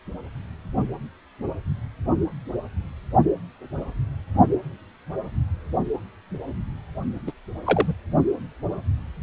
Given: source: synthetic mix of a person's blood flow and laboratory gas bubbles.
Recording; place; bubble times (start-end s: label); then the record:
Doppler ultrasound of blood flow; precordium
7.27-7.32 s: bubbles
7.65-7.95 s: bubbles
From the record:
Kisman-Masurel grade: 212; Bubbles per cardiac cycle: several, 3 to 8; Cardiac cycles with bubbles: 1 to 10%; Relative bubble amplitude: moderate (0.250 to 0.450); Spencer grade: 1 (occasional bubble signal discernible with the cardiac motion signal, with majority of cardiac periods free of bubbles); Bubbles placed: only in the low amplitude regions of the cardiac cycle